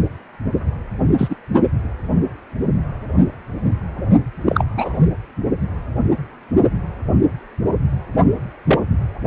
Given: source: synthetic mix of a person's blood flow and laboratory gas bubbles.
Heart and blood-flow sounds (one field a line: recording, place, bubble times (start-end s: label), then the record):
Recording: Doppler ultrasound of blood flow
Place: precordium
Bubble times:
1.18-1.36 s: bubbles
4.45-4.63 s: bubbles
4.76-5.01 s: bubbles
8.67-8.79 s: bubbles
From the record:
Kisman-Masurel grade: 123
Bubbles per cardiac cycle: 1 to 2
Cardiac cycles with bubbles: 10 to 50%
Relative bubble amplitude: loud (0.450 to 0.775)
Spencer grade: 2 (many but less than half of the cardiac periods contain bubble signals, singularly or in groups)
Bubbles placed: only in the low amplitude regions of the cardiac cycle